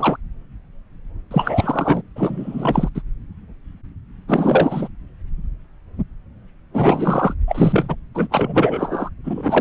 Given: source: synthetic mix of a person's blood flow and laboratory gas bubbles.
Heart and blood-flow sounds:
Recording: Doppler ultrasound of blood flow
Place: subclavian vein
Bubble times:
0.00-0.17 s: bubbles
1.30-2.02 s: bubbles
2.15-2.89 s: bubbles
2.95-3.02 s: bubbles
4.28-4.88 s: bubbles
6.73-7.33 s: bubbles
7.47-7.96 s: bubbles
8.14-8.28 s: bubbles
8.31-9.09 s: bubbles
9.24-9.61 s: bubbles
From the record:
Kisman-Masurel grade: 333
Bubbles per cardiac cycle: rolling drumbeat, 9 or more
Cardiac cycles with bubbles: 50 to 99%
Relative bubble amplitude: loud (0.450 to 0.775)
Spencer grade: 3 (all of the cardiac periods contain showers or single bubble signals, but not dominating or overriding the cardiac motion signals)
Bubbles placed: anywhere in the cardiac cycle

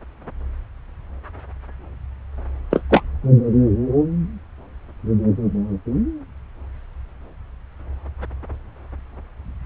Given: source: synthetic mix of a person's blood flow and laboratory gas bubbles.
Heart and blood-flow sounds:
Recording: Doppler ultrasound of blood flow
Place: subclavian vein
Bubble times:
2.71-2.81 s: bubbles
2.90-3.02 s: bubbles
From the record:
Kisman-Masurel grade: 113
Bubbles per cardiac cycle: 1 to 2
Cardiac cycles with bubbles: 1 to 10%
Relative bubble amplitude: loud (0.450 to 0.775)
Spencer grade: 1 (occasional bubble signal discernible with the cardiac motion signal, with majority of cardiac periods free of bubbles)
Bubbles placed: anywhere in the cardiac cycle

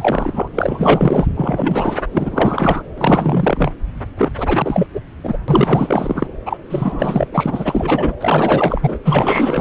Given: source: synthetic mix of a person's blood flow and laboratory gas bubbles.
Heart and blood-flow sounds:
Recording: Doppler ultrasound of blood flow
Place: subclavian vein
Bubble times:
0.00-0.48 s: bubbles
0.54-1.28 s: bubbles
1.36-2.02 s: bubbles
2.11-2.83 s: bubbles
2.97-3.72 s: bubbles
4.17-4.32 s: bubbles
4.38-4.87 s: bubbles
4.94-5.01 s: bubbles
5.23-5.38 s: bubbles
5.48-6.27 s: bubbles
6.45-6.57 s: bubbles
6.69-7.29 s: bubbles
7.32-8.13 s: bubbles
8.20-8.98 s: bubbles
9.04-9.61 s: bubbles
From the record:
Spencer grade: 4 (maximum detectable bubble signal sounding continuously throughout systole and diastole of every cardiac period, and overriding the amplitude of the normal cardiac signals)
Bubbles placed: anywhere in the cardiac cycle

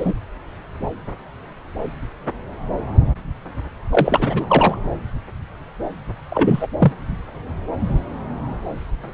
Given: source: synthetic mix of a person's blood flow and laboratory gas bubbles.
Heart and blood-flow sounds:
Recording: Doppler ultrasound of blood flow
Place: subclavian vein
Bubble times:
0.00-0.14 s: bubbles
3.92-4.75 s: bubbles
6.29-6.67 s: bubbles
6.79-6.92 s: bubbles
From the record:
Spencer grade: 2 (many but less than half of the cardiac periods contain bubble signals, singularly or in groups)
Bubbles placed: anywhere in the cardiac cycle

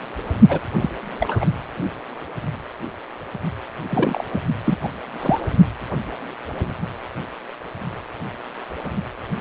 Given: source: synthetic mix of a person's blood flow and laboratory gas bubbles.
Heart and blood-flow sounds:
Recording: Doppler ultrasound of blood flow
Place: precordium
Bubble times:
0.48-0.59 s: bubbles
0.81-0.90 s: bubbles
1.20-1.45 s: bubbles
3.90-4.25 s: bubbles
4.33-4.42 s: bubbles
4.64-4.76 s: bubbles
4.83-4.88 s: bubbles
5.19-5.41 s: bubbles
From the record:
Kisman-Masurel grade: 222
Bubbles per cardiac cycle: several, 3 to 8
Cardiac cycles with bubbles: 10 to 50%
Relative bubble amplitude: moderate (0.250 to 0.450)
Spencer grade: 2 (many but less than half of the cardiac periods contain bubble signals, singularly or in groups)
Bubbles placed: only in the low amplitude regions of the cardiac cycle

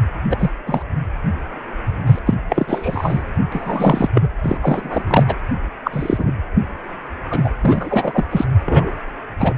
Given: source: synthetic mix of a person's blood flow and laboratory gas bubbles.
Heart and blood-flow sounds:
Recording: Doppler ultrasound of blood flow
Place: precordium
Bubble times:
0.29-0.51 s: bubbles
0.66-0.83 s: bubbles
2.05-2.19 s: bubbles
2.26-2.35 s: bubbles
2.49-3.23 s: bubbles
3.52-4.09 s: bubbles
4.14-4.29 s: bubbles
4.43-4.58 s: bubbles
4.62-5.03 s: bubbles
5.07-5.25 s: bubbles
5.27-5.35 s: bubbles
5.84-6.32 s: bubbles
7.30-7.50 s: bubbles
7.62-8.24 s: bubbles
8.30-8.45 s: bubbles
8.65-8.92 s: bubbles
9.39-9.54 s: bubbles
From the record:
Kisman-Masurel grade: 243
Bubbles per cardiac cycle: several, 3 to 8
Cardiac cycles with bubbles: 100%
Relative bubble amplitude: loud (0.450 to 0.775)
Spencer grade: 3 (all of the cardiac periods contain showers or single bubble signals, but not dominating or overriding the cardiac motion signals)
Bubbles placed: anywhere in the cardiac cycle

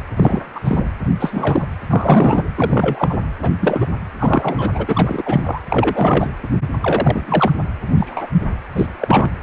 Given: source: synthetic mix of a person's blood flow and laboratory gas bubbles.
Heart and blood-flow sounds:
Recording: Doppler ultrasound of blood flow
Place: precordium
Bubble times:
0.17-0.42 s: bubbles
0.54-0.60 s: bubbles
0.64-0.87 s: bubbles
1.20-1.66 s: bubbles
1.90-2.43 s: bubbles
2.55-3.18 s: bubbles
3.42-3.50 s: bubbles
3.60-3.87 s: bubbles
4.19-5.23 s: bubbles
5.25-5.42 s: bubbles
5.46-5.62 s: bubbles
5.69-6.30 s: bubbles
6.82-7.52 s: bubbles
7.93-8.27 s: bubbles
8.75-8.87 s: bubbles
9.00-9.30 s: bubbles
From the record:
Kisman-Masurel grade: 243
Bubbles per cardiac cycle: several, 3 to 8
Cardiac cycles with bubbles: 100%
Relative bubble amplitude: loud (0.450 to 0.775)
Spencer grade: 3 (all of the cardiac periods contain showers or single bubble signals, but not dominating or overriding the cardiac motion signals)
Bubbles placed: anywhere in the cardiac cycle

